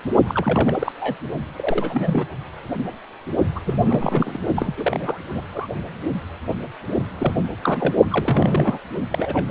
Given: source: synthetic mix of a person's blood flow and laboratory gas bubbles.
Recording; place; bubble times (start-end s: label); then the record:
Doppler ultrasound of blood flow; precordium
0.27-0.92 s: bubbles
0.99-1.16 s: bubbles
1.56-2.26 s: bubbles
3.55-3.60 s: bubbles
3.66-4.38 s: bubbles
4.56-4.73 s: bubbles
4.78-5.18 s: bubbles
5.34-5.44 s: bubbles
5.53-5.67 s: bubbles
7.18-7.33 s: bubbles
7.62-7.94 s: bubbles
8.01-8.79 s: bubbles
9.10-9.46 s: bubbles
From the record:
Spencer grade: 3 (all of the cardiac periods contain showers or single bubble signals, but not dominating or overriding the cardiac motion signals); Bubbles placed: only in the low amplitude regions of the cardiac cycle